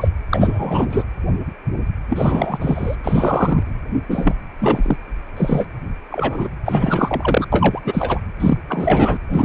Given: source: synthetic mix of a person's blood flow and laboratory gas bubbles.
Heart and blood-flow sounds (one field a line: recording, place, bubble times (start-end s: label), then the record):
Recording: Doppler ultrasound of blood flow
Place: precordium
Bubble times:
0.00-0.08 s: bubbles
0.29-1.03 s: bubbles
2.09-2.58 s: bubbles
2.61-2.95 s: bubbles
3.03-3.74 s: bubbles
4.08-4.35 s: bubbles
4.60-4.96 s: bubbles
5.37-5.66 s: bubbles
6.11-6.48 s: bubbles
6.65-7.46 s: bubbles
7.52-7.81 s: bubbles
7.84-8.21 s: bubbles
8.40-8.58 s: bubbles
8.69-9.18 s: bubbles
9.30-9.45 s: bubbles
From the record:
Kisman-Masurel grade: 333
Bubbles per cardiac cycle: rolling drumbeat, 9 or more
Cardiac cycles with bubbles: 50 to 99%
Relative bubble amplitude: loud (0.450 to 0.775)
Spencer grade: 3 (all of the cardiac periods contain showers or single bubble signals, but not dominating or overriding the cardiac motion signals)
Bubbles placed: anywhere in the cardiac cycle